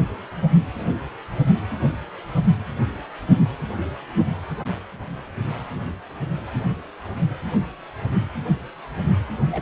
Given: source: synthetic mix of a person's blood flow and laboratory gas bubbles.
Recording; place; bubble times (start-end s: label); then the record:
Doppler ultrasound of blood flow; precordium
9.51-9.62 s: bubbles
From the record:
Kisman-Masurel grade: 111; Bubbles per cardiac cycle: 1 to 2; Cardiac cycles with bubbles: 1 to 10%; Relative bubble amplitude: barely perceptible (0.100 to 0.250); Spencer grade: 1 (occasional bubble signal discernible with the cardiac motion signal, with majority of cardiac periods free of bubbles); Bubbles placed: anywhere in the cardiac cycle